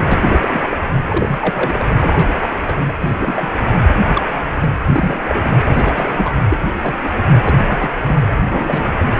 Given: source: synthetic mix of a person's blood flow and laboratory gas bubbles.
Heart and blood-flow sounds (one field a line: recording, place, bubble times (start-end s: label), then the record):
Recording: Doppler ultrasound of blood flow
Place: precordium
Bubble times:
0.00-0.48 s: bubbles
0.52-0.61 s: bubbles
0.70-0.78 s: bubbles
1.05-1.85 s: bubbles
2.00-2.29 s: bubbles
2.40-2.50 s: bubbles
2.67-2.93 s: bubbles
3.02-3.50 s: bubbles
4.05-4.22 s: bubbles
4.61-4.71 s: bubbles
4.87-5.20 s: bubbles
5.28-5.56 s: bubbles
5.65-5.94 s: bubbles
5.96-6.34 s: bubbles
6.48-6.57 s: bubbles
6.81-6.95 s: bubbles
7.03-7.12 s: bubbles
7.44-7.90 s: bubbles
7.97-8.28 s: bubbles
8.48-9.14 s: bubbles
From the record:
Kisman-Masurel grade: 242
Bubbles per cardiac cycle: several, 3 to 8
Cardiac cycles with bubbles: 100%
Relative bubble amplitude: moderate (0.250 to 0.450)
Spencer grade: 3 (all of the cardiac periods contain showers or single bubble signals, but not dominating or overriding the cardiac motion signals)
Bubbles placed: anywhere in the cardiac cycle